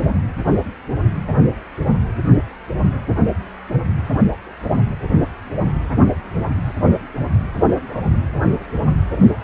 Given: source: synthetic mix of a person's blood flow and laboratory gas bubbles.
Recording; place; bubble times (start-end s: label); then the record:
Doppler ultrasound of blood flow; precordium
no bubbles
From the record:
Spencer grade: 0 (complete lack of bubble signals)